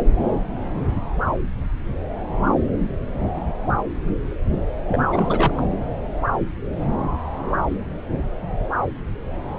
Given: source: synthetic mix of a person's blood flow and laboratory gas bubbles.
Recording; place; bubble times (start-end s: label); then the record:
Doppler ultrasound of blood flow; subclavian vein
4.88-5.63 s: bubbles
From the record:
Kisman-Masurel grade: 212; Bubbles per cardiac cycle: several, 3 to 8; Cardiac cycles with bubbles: 1 to 10%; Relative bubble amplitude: moderate (0.250 to 0.450); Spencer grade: 1 (occasional bubble signal discernible with the cardiac motion signal, with majority of cardiac periods free of bubbles); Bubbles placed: anywhere in the cardiac cycle